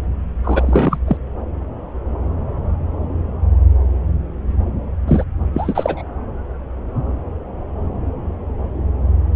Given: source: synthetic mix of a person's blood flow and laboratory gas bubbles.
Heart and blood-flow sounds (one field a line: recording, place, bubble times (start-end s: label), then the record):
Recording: Doppler ultrasound of blood flow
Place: subclavian vein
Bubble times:
0.44-0.99 s: bubbles
1.07-1.18 s: bubbles
5.08-5.23 s: bubbles
5.54-6.02 s: bubbles
From the record:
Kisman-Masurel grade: 223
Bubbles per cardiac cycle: several, 3 to 8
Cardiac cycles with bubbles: 10 to 50%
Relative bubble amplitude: loud (0.450 to 0.775)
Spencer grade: 2 (many but less than half of the cardiac periods contain bubble signals, singularly or in groups)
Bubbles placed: anywhere in the cardiac cycle